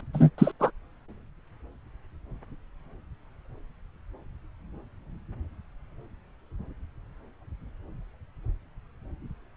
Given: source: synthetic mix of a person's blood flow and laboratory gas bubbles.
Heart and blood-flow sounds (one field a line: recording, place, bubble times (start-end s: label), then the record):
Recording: Doppler ultrasound of blood flow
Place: subclavian vein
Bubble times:
0.13-0.30 s: bubbles
0.38-0.52 s: bubbles
0.59-0.71 s: bubbles
From the record:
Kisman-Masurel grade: 213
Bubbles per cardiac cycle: several, 3 to 8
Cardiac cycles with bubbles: 1 to 10%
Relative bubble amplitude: loud (0.450 to 0.775)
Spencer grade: 1 (occasional bubble signal discernible with the cardiac motion signal, with majority of cardiac periods free of bubbles)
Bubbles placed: anywhere in the cardiac cycle